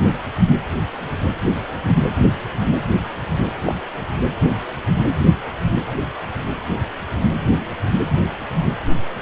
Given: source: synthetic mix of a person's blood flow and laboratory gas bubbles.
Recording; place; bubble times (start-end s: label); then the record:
Doppler ultrasound of blood flow; precordium
3.63-3.75 s: bubbles
From the record:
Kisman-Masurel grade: 112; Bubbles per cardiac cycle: 1 to 2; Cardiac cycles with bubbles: 1 to 10%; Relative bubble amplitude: moderate (0.250 to 0.450); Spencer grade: 1 (occasional bubble signal discernible with the cardiac motion signal, with majority of cardiac periods free of bubbles); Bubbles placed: anywhere in the cardiac cycle